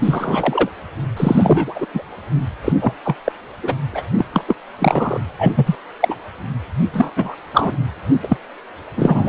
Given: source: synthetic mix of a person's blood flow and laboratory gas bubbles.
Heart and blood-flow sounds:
Doppler ultrasound of blood flow; precordium
0.02-0.68 s: bubbles
1.17-1.87 s: bubbles
1.94-2.02 s: bubbles
2.65-2.73 s: bubbles
2.81-2.93 s: bubbles
3.04-3.16 s: bubbles
3.25-3.32 s: bubbles
3.62-3.73 s: bubbles
3.93-4.02 s: bubbles
4.17-4.26 s: bubbles
4.33-4.45 s: bubbles
4.47-4.56 s: bubbles
4.78-5.21 s: bubbles
5.39-5.51 s: bubbles
5.55-5.75 s: bubbles
6.00-6.15 s: bubbles
6.93-7.10 s: bubbles
7.16-7.35 s: bubbles
7.52-7.72 s: bubbles
8.23-8.37 s: bubbles
8.96-9.29 s: bubbles
From the record:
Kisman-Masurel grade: 233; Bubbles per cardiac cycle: several, 3 to 8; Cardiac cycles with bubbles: 50 to 99%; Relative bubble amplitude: loud (0.450 to 0.775); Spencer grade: 3 (all of the cardiac periods contain showers or single bubble signals, but not dominating or overriding the cardiac motion signals); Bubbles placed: anywhere in the cardiac cycle

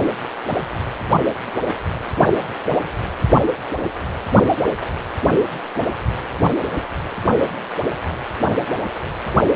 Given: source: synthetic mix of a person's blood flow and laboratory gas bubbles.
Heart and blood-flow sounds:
Doppler ultrasound of blood flow; precordium
no bubbles
From the record:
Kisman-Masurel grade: 000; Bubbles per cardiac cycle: 0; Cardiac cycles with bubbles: 0%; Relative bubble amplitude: no bubbles discernible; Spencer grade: 0 (complete lack of bubble signals)

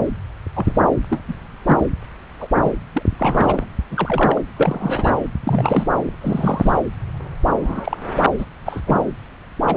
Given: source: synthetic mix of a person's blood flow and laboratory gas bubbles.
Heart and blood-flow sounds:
Doppler ultrasound of blood flow; subclavian vein
0.54-0.83 s: bubbles
1.10-1.21 s: bubbles
1.27-1.33 s: bubbles
1.66-1.83 s: bubbles
2.40-2.48 s: bubbles
2.59-2.71 s: bubbles
2.94-3.04 s: bubbles
3.19-3.65 s: bubbles
3.90-4.42 s: bubbles
4.57-5.18 s: bubbles
5.43-5.86 s: bubbles
6.21-6.83 s: bubbles
7.46-7.97 s: bubbles
8.38-8.45 s: bubbles
8.66-8.81 s: bubbles
8.86-9.09 s: bubbles
9.66-9.77 s: bubbles
From the record:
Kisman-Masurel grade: 242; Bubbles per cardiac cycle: several, 3 to 8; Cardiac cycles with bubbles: 100%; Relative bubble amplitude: moderate (0.250 to 0.450); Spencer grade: 3 (all of the cardiac periods contain showers or single bubble signals, but not dominating or overriding the cardiac motion signals); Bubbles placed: anywhere in the cardiac cycle

